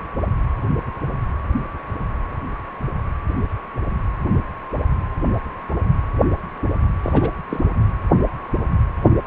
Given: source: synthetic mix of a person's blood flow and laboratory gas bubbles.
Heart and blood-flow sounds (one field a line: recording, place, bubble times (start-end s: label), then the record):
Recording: Doppler ultrasound of blood flow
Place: precordium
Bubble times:
7.02-7.30 s: bubbles
7.49-7.60 s: bubbles
From the record:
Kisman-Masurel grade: 212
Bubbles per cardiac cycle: several, 3 to 8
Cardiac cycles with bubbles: 1 to 10%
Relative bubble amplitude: moderate (0.250 to 0.450)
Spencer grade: 1 (occasional bubble signal discernible with the cardiac motion signal, with majority of cardiac periods free of bubbles)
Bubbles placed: anywhere in the cardiac cycle